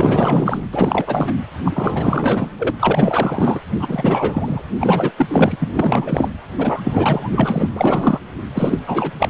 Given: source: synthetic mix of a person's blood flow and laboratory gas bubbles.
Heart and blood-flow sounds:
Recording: Doppler ultrasound of blood flow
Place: precordium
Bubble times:
0.00-0.61 s: bubbles
0.73-1.32 s: bubbles
1.65-2.50 s: bubbles
2.58-2.71 s: bubbles
2.79-3.60 s: bubbles
3.79-4.62 s: bubbles
4.80-5.12 s: bubbles
5.17-5.55 s: bubbles
5.59-5.68 s: bubbles
5.74-6.29 s: bubbles
6.58-7.69 s: bubbles
7.75-8.20 s: bubbles
8.54-9.12 s: bubbles
9.19-9.30 s: bubbles
From the record:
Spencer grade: 4 (maximum detectable bubble signal sounding continuously throughout systole and diastole of every cardiac period, and overriding the amplitude of the normal cardiac signals)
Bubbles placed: anywhere in the cardiac cycle

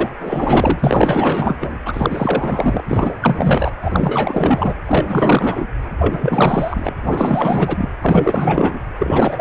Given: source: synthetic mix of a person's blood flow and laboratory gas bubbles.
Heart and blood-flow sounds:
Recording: Doppler ultrasound of blood flow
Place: precordium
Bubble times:
0.00-0.09 s: bubbles
0.20-1.56 s: bubbles
1.60-1.77 s: bubbles
1.85-2.81 s: bubbles
2.88-3.15 s: bubbles
3.21-3.71 s: bubbles
3.83-4.78 s: bubbles
4.86-5.67 s: bubbles
5.99-6.94 s: bubbles
7.03-7.89 s: bubbles
8.01-8.79 s: bubbles
9.00-9.41 s: bubbles
From the record:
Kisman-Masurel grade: 444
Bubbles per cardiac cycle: continuous sound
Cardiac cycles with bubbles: 100%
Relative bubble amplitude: maximal (0.775 to 0.999)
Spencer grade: 4 (maximum detectable bubble signal sounding continuously throughout systole and diastole of every cardiac period, and overriding the amplitude of the normal cardiac signals)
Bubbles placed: anywhere in the cardiac cycle

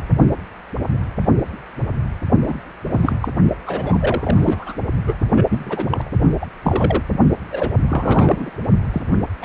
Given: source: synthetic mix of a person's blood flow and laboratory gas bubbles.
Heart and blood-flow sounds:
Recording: Doppler ultrasound of blood flow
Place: precordium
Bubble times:
2.48-2.60 s: bubbles
2.90-3.16 s: bubbles
3.21-3.29 s: bubbles
3.66-4.75 s: bubbles
5.06-5.14 s: bubbles
5.35-5.44 s: bubbles
5.49-6.09 s: bubbles
6.40-6.46 s: bubbles
6.63-7.02 s: bubbles
7.52-7.71 s: bubbles
7.89-8.50 s: bubbles
8.91-9.02 s: bubbles
9.11-9.18 s: bubbles
9.41-9.45 s: bubbles
From the record:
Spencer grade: 3 (all of the cardiac periods contain showers or single bubble signals, but not dominating or overriding the cardiac motion signals)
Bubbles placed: only in the low amplitude regions of the cardiac cycle

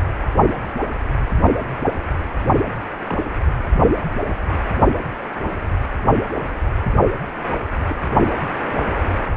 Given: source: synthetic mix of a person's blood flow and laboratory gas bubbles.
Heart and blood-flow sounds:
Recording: Doppler ultrasound of blood flow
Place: precordium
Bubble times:
3.04-3.23 s: bubbles
5.12-5.16 s: bubbles
6.33-6.40 s: bubbles
7.88-7.94 s: bubbles
8.39-8.50 s: bubbles
From the record:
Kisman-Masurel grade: 121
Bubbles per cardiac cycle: 1 to 2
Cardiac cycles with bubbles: 10 to 50%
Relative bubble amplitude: barely perceptible (0.100 to 0.250)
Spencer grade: 2 (many but less than half of the cardiac periods contain bubble signals, singularly or in groups)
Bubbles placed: only in the low amplitude regions of the cardiac cycle

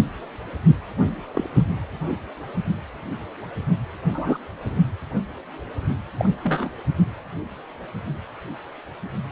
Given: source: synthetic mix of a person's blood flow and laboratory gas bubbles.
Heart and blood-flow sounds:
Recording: Doppler ultrasound of blood flow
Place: precordium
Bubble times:
1.33-1.50 s: bubbles
1.54-1.67 s: bubbles
4.09-4.38 s: bubbles
6.18-6.29 s: bubbles
6.43-6.70 s: bubbles
From the record:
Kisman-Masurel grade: 122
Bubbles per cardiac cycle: 1 to 2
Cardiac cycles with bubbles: 10 to 50%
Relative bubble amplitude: moderate (0.250 to 0.450)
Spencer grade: 2 (many but less than half of the cardiac periods contain bubble signals, singularly or in groups)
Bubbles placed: only in the low amplitude regions of the cardiac cycle

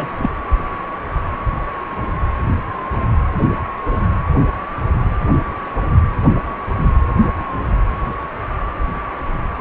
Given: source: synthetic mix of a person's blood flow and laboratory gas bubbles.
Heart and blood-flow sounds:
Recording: Doppler ultrasound of blood flow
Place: precordium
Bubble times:
0.00-0.09 s: bubbles
0.17-0.29 s: bubbles
From the record:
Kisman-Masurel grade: 112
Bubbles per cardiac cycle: 1 to 2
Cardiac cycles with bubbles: 1 to 10%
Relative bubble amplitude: moderate (0.250 to 0.450)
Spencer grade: 1 (occasional bubble signal discernible with the cardiac motion signal, with majority of cardiac periods free of bubbles)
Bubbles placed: anywhere in the cardiac cycle

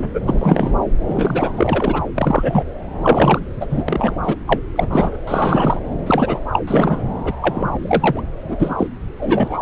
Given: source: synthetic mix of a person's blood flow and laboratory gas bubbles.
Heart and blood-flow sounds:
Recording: Doppler ultrasound of blood flow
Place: subclavian vein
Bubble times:
0.00-0.21 s: bubbles
0.26-0.74 s: bubbles
1.07-1.53 s: bubbles
1.56-2.02 s: bubbles
2.15-2.63 s: bubbles
3.02-3.40 s: bubbles
3.60-3.67 s: bubbles
3.69-3.83 s: bubbles
3.88-4.14 s: bubbles
4.23-4.36 s: bubbles
4.47-4.59 s: bubbles
4.75-5.17 s: bubbles
5.27-5.80 s: bubbles
6.06-6.40 s: bubbles
6.52-6.60 s: bubbles
6.67-7.03 s: bubbles
7.24-7.33 s: bubbles
7.40-7.77 s: bubbles
7.82-8.21 s: bubbles
8.47-8.75 s: bubbles
8.78-8.88 s: bubbles
9.17-9.62 s: bubbles
From the record:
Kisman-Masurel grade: 243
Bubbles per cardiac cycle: several, 3 to 8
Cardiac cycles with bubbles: 100%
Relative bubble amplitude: loud (0.450 to 0.775)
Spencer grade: 3 (all of the cardiac periods contain showers or single bubble signals, but not dominating or overriding the cardiac motion signals)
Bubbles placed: anywhere in the cardiac cycle

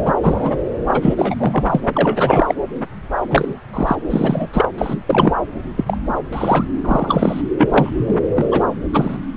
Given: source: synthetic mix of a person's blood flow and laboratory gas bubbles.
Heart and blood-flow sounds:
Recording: Doppler ultrasound of blood flow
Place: subclavian vein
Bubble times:
0.05-0.14 s: bubbles
0.23-0.57 s: bubbles
0.83-1.35 s: bubbles
1.38-1.64 s: bubbles
1.69-1.80 s: bubbles
1.93-2.55 s: bubbles
3.30-3.53 s: bubbles
3.73-3.95 s: bubbles
4.09-4.49 s: bubbles
4.53-4.69 s: bubbles
4.78-4.98 s: bubbles
5.06-5.34 s: bubbles
5.76-5.98 s: bubbles
6.32-6.65 s: bubbles
6.84-7.42 s: bubbles
7.57-8.20 s: bubbles
8.36-8.63 s: bubbles
8.93-9.17 s: bubbles
From the record:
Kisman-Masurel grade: 233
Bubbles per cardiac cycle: several, 3 to 8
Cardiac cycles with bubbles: 50 to 99%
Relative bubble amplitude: loud (0.450 to 0.775)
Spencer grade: 3 (all of the cardiac periods contain showers or single bubble signals, but not dominating or overriding the cardiac motion signals)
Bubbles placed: anywhere in the cardiac cycle

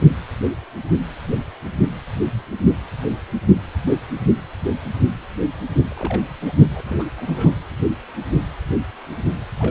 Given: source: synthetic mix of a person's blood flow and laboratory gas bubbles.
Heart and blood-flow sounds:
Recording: Doppler ultrasound of blood flow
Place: precordium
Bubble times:
0.00-0.11 s: bubbles
5.91-6.21 s: bubbles
6.42-6.53 s: bubbles
6.75-6.80 s: bubbles
6.87-7.05 s: bubbles
7.16-7.58 s: bubbles
9.58-9.71 s: bubbles
From the record:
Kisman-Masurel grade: 221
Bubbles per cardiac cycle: several, 3 to 8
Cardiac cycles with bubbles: 10 to 50%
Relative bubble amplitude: barely perceptible (0.100 to 0.250)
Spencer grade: 2 (many but less than half of the cardiac periods contain bubble signals, singularly or in groups)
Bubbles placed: anywhere in the cardiac cycle

